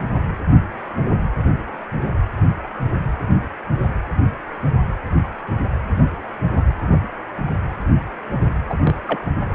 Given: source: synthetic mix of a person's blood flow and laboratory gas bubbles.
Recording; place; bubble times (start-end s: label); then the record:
Doppler ultrasound of blood flow; precordium
8.69-8.76 s: bubbles
8.83-8.96 s: bubbles
9.07-9.19 s: bubbles
From the record:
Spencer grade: 1 (occasional bubble signal discernible with the cardiac motion signal, with majority of cardiac periods free of bubbles); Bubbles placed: anywhere in the cardiac cycle